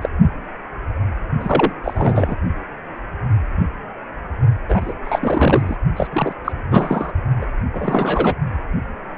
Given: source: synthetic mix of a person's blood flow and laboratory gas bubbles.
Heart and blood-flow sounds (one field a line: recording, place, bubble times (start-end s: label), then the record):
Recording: Doppler ultrasound of blood flow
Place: precordium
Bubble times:
0.01-0.09 s: bubbles
1.40-1.72 s: bubbles
1.83-2.35 s: bubbles
4.68-4.93 s: bubbles
5.04-5.77 s: bubbles
5.96-6.08 s: bubbles
6.12-6.33 s: bubbles
6.45-6.52 s: bubbles
6.71-7.13 s: bubbles
7.41-7.46 s: bubbles
7.73-8.35 s: bubbles
From the record:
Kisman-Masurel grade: 333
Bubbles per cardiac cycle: rolling drumbeat, 9 or more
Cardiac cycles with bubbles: 50 to 99%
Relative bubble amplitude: loud (0.450 to 0.775)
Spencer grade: 3 (all of the cardiac periods contain showers or single bubble signals, but not dominating or overriding the cardiac motion signals)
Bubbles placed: only in the low amplitude regions of the cardiac cycle